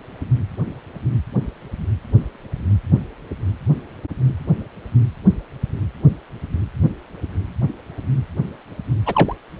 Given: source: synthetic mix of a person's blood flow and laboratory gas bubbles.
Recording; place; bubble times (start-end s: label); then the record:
Doppler ultrasound of blood flow; precordium
9.05-9.36 s: bubbles
From the record:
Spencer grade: 1 (occasional bubble signal discernible with the cardiac motion signal, with majority of cardiac periods free of bubbles); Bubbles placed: anywhere in the cardiac cycle